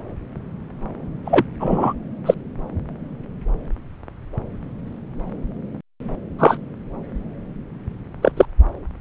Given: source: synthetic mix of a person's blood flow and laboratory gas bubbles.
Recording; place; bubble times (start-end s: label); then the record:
Doppler ultrasound of blood flow; subclavian vein
1.25-1.44 s: bubbles
1.59-1.93 s: bubbles
2.25-2.34 s: bubbles
6.38-6.58 s: bubbles
8.22-8.32 s: bubbles
8.37-8.45 s: bubbles
From the record:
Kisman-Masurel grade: 123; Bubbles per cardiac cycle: 1 to 2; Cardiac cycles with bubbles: 10 to 50%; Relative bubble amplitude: loud (0.450 to 0.775); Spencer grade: 2 (many but less than half of the cardiac periods contain bubble signals, singularly or in groups); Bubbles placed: anywhere in the cardiac cycle